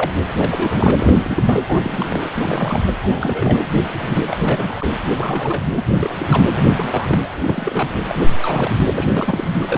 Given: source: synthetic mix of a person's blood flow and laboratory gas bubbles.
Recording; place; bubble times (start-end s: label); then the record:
Doppler ultrasound of blood flow; precordium
0.00-0.11 s: bubbles
0.38-1.16 s: bubbles
1.20-1.65 s: bubbles
1.68-2.30 s: bubbles
2.34-2.92 s: bubbles
3.02-3.64 s: bubbles
3.98-4.19 s: bubbles
4.29-4.38 s: bubbles
4.42-4.88 s: bubbles
5.20-5.65 s: bubbles
5.76-5.83 s: bubbles
6.00-6.45 s: bubbles
6.54-7.90 s: bubbles
8.07-8.21 s: bubbles
8.42-8.71 s: bubbles
8.85-8.90 s: bubbles
8.94-9.49 s: bubbles
9.61-9.78 s: bubbles
From the record:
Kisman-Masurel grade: 342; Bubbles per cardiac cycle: rolling drumbeat, 9 or more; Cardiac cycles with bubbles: 100%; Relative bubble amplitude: moderate (0.250 to 0.450); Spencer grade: 3 (all of the cardiac periods contain showers or single bubble signals, but not dominating or overriding the cardiac motion signals); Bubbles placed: anywhere in the cardiac cycle